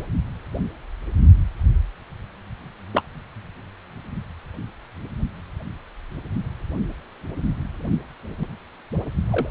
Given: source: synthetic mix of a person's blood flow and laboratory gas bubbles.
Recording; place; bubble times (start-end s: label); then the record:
Doppler ultrasound of blood flow; precordium
2.93-3.02 s: bubbles
9.30-9.49 s: bubbles
From the record:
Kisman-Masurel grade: 122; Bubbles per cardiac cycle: 1 to 2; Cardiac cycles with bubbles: 10 to 50%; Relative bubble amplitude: moderate (0.250 to 0.450); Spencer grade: 2 (many but less than half of the cardiac periods contain bubble signals, singularly or in groups); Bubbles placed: only in the low amplitude regions of the cardiac cycle